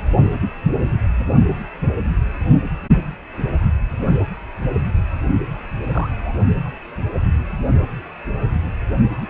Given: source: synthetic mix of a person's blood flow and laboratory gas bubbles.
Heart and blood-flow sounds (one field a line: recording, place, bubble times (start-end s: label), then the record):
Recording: Doppler ultrasound of blood flow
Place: precordium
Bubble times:
5.84-6.35 s: bubbles
9.21-9.29 s: bubbles
From the record:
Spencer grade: 2 (many but less than half of the cardiac periods contain bubble signals, singularly or in groups)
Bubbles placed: only in the low amplitude regions of the cardiac cycle